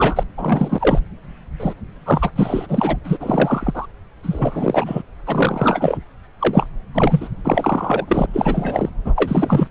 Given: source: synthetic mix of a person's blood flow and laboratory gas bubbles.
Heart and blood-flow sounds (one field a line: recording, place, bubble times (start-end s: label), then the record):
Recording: Doppler ultrasound of blood flow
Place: subclavian vein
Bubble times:
0.00-0.23 s: bubbles
0.37-0.99 s: bubbles
1.59-1.73 s: bubbles
2.05-2.32 s: bubbles
2.35-2.67 s: bubbles
2.69-2.97 s: bubbles
3.04-3.86 s: bubbles
4.23-5.03 s: bubbles
5.27-5.98 s: bubbles
6.39-6.66 s: bubbles
6.94-7.29 s: bubbles
7.45-8.26 s: bubbles
8.33-8.89 s: bubbles
9.04-9.67 s: bubbles
From the record:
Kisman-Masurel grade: 343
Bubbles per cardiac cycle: rolling drumbeat, 9 or more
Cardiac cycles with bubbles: 100%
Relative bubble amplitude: loud (0.450 to 0.775)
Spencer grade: 3 (all of the cardiac periods contain showers or single bubble signals, but not dominating or overriding the cardiac motion signals)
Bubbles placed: anywhere in the cardiac cycle